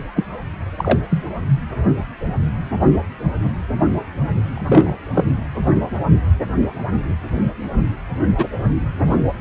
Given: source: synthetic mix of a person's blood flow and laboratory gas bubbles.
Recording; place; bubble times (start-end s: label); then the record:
Doppler ultrasound of blood flow; precordium
0.15-0.24 s: bubbles
0.78-1.01 s: bubbles
1.10-1.25 s: bubbles
4.54-4.92 s: bubbles
5.13-5.25 s: bubbles
8.38-8.48 s: bubbles
9.06-9.16 s: bubbles
From the record:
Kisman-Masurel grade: 123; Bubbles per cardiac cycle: 1 to 2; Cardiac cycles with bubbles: 10 to 50%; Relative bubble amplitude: loud (0.450 to 0.775); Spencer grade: 2 (many but less than half of the cardiac periods contain bubble signals, singularly or in groups); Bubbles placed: anywhere in the cardiac cycle